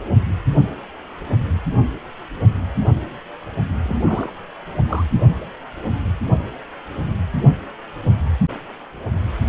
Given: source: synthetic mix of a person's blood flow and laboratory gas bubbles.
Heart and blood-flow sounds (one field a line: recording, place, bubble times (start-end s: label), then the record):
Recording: Doppler ultrasound of blood flow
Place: precordium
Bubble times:
3.82-4.33 s: bubbles
4.87-5.05 s: bubbles
From the record:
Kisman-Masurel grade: 112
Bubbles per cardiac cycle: 1 to 2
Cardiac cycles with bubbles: 1 to 10%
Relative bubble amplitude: moderate (0.250 to 0.450)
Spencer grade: 1 (occasional bubble signal discernible with the cardiac motion signal, with majority of cardiac periods free of bubbles)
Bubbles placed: only in the low amplitude regions of the cardiac cycle